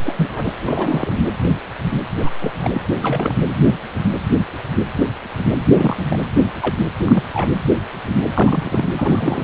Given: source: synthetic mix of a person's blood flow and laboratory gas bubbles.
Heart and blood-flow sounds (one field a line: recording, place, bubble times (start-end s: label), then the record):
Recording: Doppler ultrasound of blood flow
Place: precordium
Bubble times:
0.03-0.53 s: bubbles
0.66-1.18 s: bubbles
2.20-2.31 s: bubbles
2.39-2.51 s: bubbles
2.61-2.81 s: bubbles
3.01-3.36 s: bubbles
5.73-6.05 s: bubbles
6.10-6.18 s: bubbles
6.60-6.75 s: bubbles
7.02-7.23 s: bubbles
7.33-7.50 s: bubbles
8.34-8.89 s: bubbles
8.93-9.44 s: bubbles
From the record:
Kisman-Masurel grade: 232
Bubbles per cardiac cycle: several, 3 to 8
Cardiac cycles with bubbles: 50 to 99%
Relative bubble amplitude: moderate (0.250 to 0.450)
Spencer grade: 3 (all of the cardiac periods contain showers or single bubble signals, but not dominating or overriding the cardiac motion signals)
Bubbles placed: anywhere in the cardiac cycle